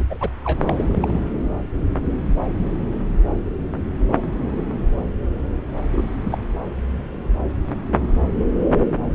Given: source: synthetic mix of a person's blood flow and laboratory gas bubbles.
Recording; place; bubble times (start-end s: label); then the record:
Doppler ultrasound of blood flow; subclavian vein
0.00-0.05 s: bubbles
0.10-0.30 s: bubbles
0.44-0.75 s: bubbles
0.78-1.24 s: bubbles
5.92-6.07 s: bubbles
6.25-6.38 s: bubbles
From the record:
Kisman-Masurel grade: 222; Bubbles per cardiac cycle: several, 3 to 8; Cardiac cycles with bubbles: 10 to 50%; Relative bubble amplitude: moderate (0.250 to 0.450); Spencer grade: 2 (many but less than half of the cardiac periods contain bubble signals, singularly or in groups); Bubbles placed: anywhere in the cardiac cycle